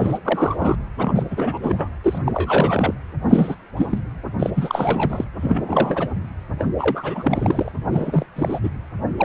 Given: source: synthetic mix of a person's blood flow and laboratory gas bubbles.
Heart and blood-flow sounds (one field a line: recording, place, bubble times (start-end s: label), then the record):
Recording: Doppler ultrasound of blood flow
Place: precordium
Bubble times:
0.00-0.19 s: bubbles
0.24-0.76 s: bubbles
0.98-1.23 s: bubbles
1.30-1.58 s: bubbles
1.62-1.88 s: bubbles
2.04-2.19 s: bubbles
2.25-2.94 s: bubbles
3.28-3.55 s: bubbles
3.77-3.98 s: bubbles
4.39-4.51 s: bubbles
4.54-5.25 s: bubbles
5.41-6.08 s: bubbles
6.58-6.67 s: bubbles
6.79-7.72 s: bubbles
7.91-8.26 s: bubbles
8.36-8.60 s: bubbles
8.63-8.70 s: bubbles
9.18-9.25 s: bubbles
From the record:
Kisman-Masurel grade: 343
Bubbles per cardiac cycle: rolling drumbeat, 9 or more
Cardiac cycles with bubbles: 100%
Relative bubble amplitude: loud (0.450 to 0.775)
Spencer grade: 3 (all of the cardiac periods contain showers or single bubble signals, but not dominating or overriding the cardiac motion signals)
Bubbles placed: anywhere in the cardiac cycle